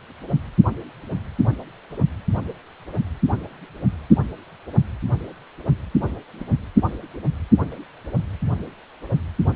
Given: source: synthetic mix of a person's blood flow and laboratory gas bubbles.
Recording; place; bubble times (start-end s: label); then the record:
Doppler ultrasound of blood flow; precordium
6.05-6.16 s: bubbles
6.40-6.45 s: bubbles
From the record:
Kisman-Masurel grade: 111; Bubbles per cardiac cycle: 1 to 2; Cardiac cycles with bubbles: 1 to 10%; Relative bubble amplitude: barely perceptible (0.100 to 0.250); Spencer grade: 1 (occasional bubble signal discernible with the cardiac motion signal, with majority of cardiac periods free of bubbles); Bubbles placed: anywhere in the cardiac cycle